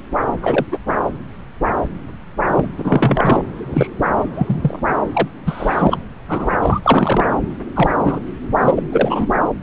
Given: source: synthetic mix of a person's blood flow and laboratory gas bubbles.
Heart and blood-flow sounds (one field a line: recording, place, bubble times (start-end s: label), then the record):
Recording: Doppler ultrasound of blood flow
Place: subclavian vein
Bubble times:
0.42-0.66 s: bubbles
0.71-0.77 s: bubbles
0.87-0.94 s: bubbles
2.47-2.65 s: bubbles
2.77-3.43 s: bubbles
3.57-3.88 s: bubbles
4.20-4.25 s: bubbles
4.35-4.79 s: bubbles
5.13-5.28 s: bubbles
5.45-5.98 s: bubbles
6.28-6.51 s: bubbles
6.62-6.80 s: bubbles
6.83-7.29 s: bubbles
7.75-7.91 s: bubbles
7.98-8.20 s: bubbles
8.61-8.75 s: bubbles
8.78-8.83 s: bubbles
8.92-9.27 s: bubbles
From the record:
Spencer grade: 3 (all of the cardiac periods contain showers or single bubble signals, but not dominating or overriding the cardiac motion signals)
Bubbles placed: anywhere in the cardiac cycle